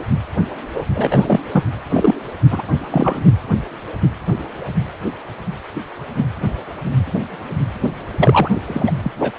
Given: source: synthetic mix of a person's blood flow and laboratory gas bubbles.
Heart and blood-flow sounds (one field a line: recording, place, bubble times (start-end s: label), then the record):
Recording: Doppler ultrasound of blood flow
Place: precordium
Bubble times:
0.74-0.85 s: bubbles
0.95-1.40 s: bubbles
1.53-1.64 s: bubbles
1.89-2.15 s: bubbles
2.50-2.62 s: bubbles
2.91-3.22 s: bubbles
8.19-8.51 s: bubbles
8.67-8.91 s: bubbles
9.02-9.12 s: bubbles
9.19-9.32 s: bubbles
From the record:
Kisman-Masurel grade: 223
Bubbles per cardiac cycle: several, 3 to 8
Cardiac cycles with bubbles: 10 to 50%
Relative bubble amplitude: loud (0.450 to 0.775)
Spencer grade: 2 (many but less than half of the cardiac periods contain bubble signals, singularly or in groups)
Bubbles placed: anywhere in the cardiac cycle